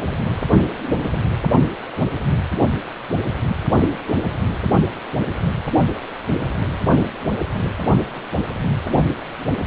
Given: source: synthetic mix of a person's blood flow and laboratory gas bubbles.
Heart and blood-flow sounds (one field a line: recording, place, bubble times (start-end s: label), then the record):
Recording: Doppler ultrasound of blood flow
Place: precordium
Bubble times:
no bubbles
From the record:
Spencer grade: 0 (complete lack of bubble signals)